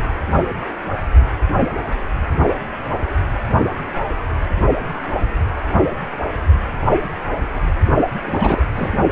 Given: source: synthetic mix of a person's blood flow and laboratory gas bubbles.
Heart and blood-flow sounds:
Doppler ultrasound of blood flow; precordium
8.20-8.64 s: bubbles
8.76-8.92 s: bubbles
From the record:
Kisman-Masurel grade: 213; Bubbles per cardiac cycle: several, 3 to 8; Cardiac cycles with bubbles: 1 to 10%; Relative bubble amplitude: loud (0.450 to 0.775); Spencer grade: 1 (occasional bubble signal discernible with the cardiac motion signal, with majority of cardiac periods free of bubbles); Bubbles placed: only in the low amplitude regions of the cardiac cycle

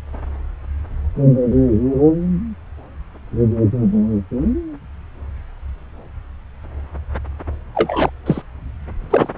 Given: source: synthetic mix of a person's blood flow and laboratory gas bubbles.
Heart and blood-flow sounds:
Doppler ultrasound of blood flow; subclavian vein
7.75-8.10 s: bubbles
8.26-8.42 s: bubbles
9.10-9.29 s: bubbles
From the record:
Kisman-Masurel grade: 223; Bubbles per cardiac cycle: several, 3 to 8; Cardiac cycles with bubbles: 10 to 50%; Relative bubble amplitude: loud (0.450 to 0.775); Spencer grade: 2 (many but less than half of the cardiac periods contain bubble signals, singularly or in groups); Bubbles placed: anywhere in the cardiac cycle

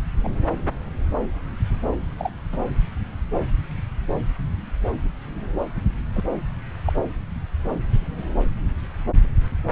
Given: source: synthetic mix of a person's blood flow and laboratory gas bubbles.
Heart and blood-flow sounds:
Doppler ultrasound of blood flow; subclavian vein
0.23-0.28 s: bubbles
2.19-2.31 s: bubbles
2.52-2.58 s: bubbles
6.14-6.20 s: bubbles
6.85-6.93 s: bubbles
From the record:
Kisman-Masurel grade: 121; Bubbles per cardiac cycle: 1 to 2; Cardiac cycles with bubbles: 10 to 50%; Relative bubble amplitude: barely perceptible (0.100 to 0.250); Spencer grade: 2 (many but less than half of the cardiac periods contain bubble signals, singularly or in groups); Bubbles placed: anywhere in the cardiac cycle

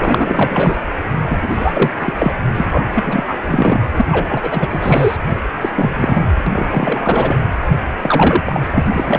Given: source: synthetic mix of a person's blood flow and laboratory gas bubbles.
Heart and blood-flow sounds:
Doppler ultrasound of blood flow; precordium
0.00-0.77 s: bubbles
1.19-1.38 s: bubbles
1.42-1.91 s: bubbles
1.99-2.13 s: bubbles
2.17-2.33 s: bubbles
2.54-2.68 s: bubbles
2.70-2.85 s: bubbles
2.90-3.39 s: bubbles
3.45-3.79 s: bubbles
3.96-4.05 s: bubbles
4.11-5.17 s: bubbles
5.61-5.69 s: bubbles
5.75-6.26 s: bubbles
6.46-6.66 s: bubbles
6.70-7.38 s: bubbles
8.02-8.42 s: bubbles
8.46-8.61 s: bubbles
8.74-9.19 s: bubbles
From the record:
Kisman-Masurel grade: 343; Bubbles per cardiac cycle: rolling drumbeat, 9 or more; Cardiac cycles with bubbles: 100%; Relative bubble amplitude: loud (0.450 to 0.775); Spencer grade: 3 (all of the cardiac periods contain showers or single bubble signals, but not dominating or overriding the cardiac motion signals); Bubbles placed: anywhere in the cardiac cycle

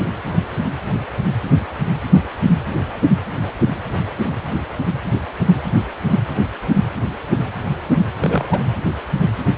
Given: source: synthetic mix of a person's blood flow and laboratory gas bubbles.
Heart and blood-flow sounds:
Doppler ultrasound of blood flow; precordium
8.20-8.63 s: bubbles
From the record:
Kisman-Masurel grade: 212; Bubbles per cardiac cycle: several, 3 to 8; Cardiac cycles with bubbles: 1 to 10%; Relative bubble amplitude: moderate (0.250 to 0.450); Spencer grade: 1 (occasional bubble signal discernible with the cardiac motion signal, with majority of cardiac periods free of bubbles); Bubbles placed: anywhere in the cardiac cycle

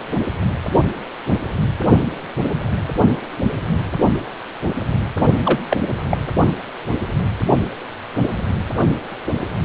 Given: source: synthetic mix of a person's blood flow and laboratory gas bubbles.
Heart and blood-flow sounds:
Doppler ultrasound of blood flow; precordium
5.43-5.59 s: bubbles
5.70-5.76 s: bubbles
6.10-6.17 s: bubbles
From the record:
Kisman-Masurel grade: 213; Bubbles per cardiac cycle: several, 3 to 8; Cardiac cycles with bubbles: 1 to 10%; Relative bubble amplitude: loud (0.450 to 0.775); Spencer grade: 1 (occasional bubble signal discernible with the cardiac motion signal, with majority of cardiac periods free of bubbles); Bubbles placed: only in the low amplitude regions of the cardiac cycle

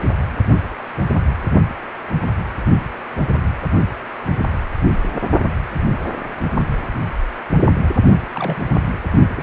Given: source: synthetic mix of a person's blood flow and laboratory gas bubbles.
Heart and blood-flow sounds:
Doppler ultrasound of blood flow; precordium
8.32-8.56 s: bubbles
9.32-9.42 s: bubbles
From the record:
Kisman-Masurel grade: 221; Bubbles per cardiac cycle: several, 3 to 8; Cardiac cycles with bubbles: 10 to 50%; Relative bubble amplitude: barely perceptible (0.100 to 0.250); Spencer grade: 2 (many but less than half of the cardiac periods contain bubble signals, singularly or in groups); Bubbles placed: only in the low amplitude regions of the cardiac cycle

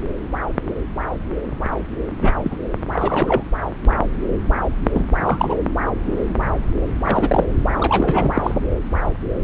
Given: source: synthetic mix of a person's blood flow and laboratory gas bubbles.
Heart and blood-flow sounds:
Doppler ultrasound of blood flow; subclavian vein
2.21-2.33 s: bubbles
2.44-2.57 s: bubbles
2.92-3.43 s: bubbles
4.94-5.06 s: bubbles
5.24-5.55 s: bubbles
7.04-7.45 s: bubbles
7.80-8.32 s: bubbles
8.36-8.55 s: bubbles
From the record:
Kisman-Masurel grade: 222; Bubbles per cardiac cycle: several, 3 to 8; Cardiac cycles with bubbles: 10 to 50%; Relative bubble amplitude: moderate (0.250 to 0.450); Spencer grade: 2 (many but less than half of the cardiac periods contain bubble signals, singularly or in groups); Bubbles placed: anywhere in the cardiac cycle

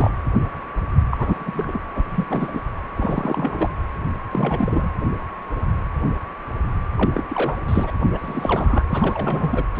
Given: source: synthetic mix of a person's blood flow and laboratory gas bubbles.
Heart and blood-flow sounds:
Doppler ultrasound of blood flow; precordium
0.00-0.10 s: bubbles
1.10-1.81 s: bubbles
1.95-2.04 s: bubbles
2.10-2.26 s: bubbles
2.29-2.61 s: bubbles
2.96-3.70 s: bubbles
4.31-4.90 s: bubbles
6.96-7.11 s: bubbles
7.14-7.24 s: bubbles
7.28-7.56 s: bubbles
7.68-7.91 s: bubbles
8.10-8.83 s: bubbles
8.90-9.64 s: bubbles
9.75-9.79 s: bubbles
From the record:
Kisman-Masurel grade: 332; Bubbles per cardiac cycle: rolling drumbeat, 9 or more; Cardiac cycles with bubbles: 50 to 99%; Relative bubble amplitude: moderate (0.250 to 0.450); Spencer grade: 3 (all of the cardiac periods contain showers or single bubble signals, but not dominating or overriding the cardiac motion signals); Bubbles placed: anywhere in the cardiac cycle

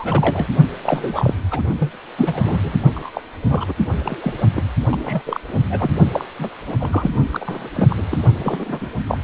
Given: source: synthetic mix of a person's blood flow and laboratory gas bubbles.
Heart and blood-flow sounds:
Doppler ultrasound of blood flow; precordium
0.00-0.47 s: bubbles
0.82-1.33 s: bubbles
1.50-1.62 s: bubbles
1.79-1.91 s: bubbles
2.18-2.59 s: bubbles
2.63-2.79 s: bubbles
2.95-3.10 s: bubbles
3.14-3.23 s: bubbles
3.48-3.73 s: bubbles
3.98-4.41 s: bubbles
4.54-4.63 s: bubbles
4.90-5.22 s: bubbles
5.26-5.41 s: bubbles
5.49-5.61 s: bubbles
5.70-5.91 s: bubbles
6.13-6.25 s: bubbles
6.39-6.50 s: bubbles
6.66-6.75 s: bubbles
6.80-7.11 s: bubbles
7.32-7.69 s: bubbles
7.73-8.06 s: bubbles
8.11-8.18 s: bubbles
8.37-8.90 s: bubbles
9.06-9.18 s: bubbles
From the record:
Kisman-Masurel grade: 342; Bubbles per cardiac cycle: rolling drumbeat, 9 or more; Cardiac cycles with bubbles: 100%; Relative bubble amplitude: moderate (0.250 to 0.450); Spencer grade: 3 (all of the cardiac periods contain showers or single bubble signals, but not dominating or overriding the cardiac motion signals); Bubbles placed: only in the low amplitude regions of the cardiac cycle

